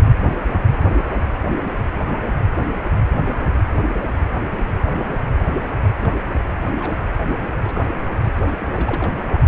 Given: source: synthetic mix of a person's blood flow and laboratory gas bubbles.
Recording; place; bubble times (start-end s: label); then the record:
Doppler ultrasound of blood flow; precordium
6.01-6.20 s: bubbles
6.62-6.71 s: bubbles
6.74-6.98 s: bubbles
7.60-7.83 s: bubbles
7.86-7.93 s: bubbles
7.98-8.07 s: bubbles
8.60-8.66 s: bubbles
8.74-9.40 s: bubbles
From the record:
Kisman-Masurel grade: 221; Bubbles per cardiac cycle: several, 3 to 8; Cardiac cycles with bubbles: 10 to 50%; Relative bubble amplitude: barely perceptible (0.100 to 0.250); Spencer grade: 2 (many but less than half of the cardiac periods contain bubble signals, singularly or in groups); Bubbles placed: only in the low amplitude regions of the cardiac cycle